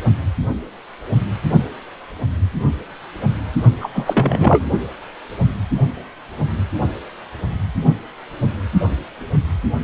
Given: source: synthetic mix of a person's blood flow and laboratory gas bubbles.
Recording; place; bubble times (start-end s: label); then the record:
Doppler ultrasound of blood flow; precordium
3.81-3.90 s: bubbles
3.94-4.64 s: bubbles
From the record:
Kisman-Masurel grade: 213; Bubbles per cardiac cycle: several, 3 to 8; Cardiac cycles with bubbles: 1 to 10%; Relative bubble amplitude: loud (0.450 to 0.775); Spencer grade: 1 (occasional bubble signal discernible with the cardiac motion signal, with majority of cardiac periods free of bubbles); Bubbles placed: only in the low amplitude regions of the cardiac cycle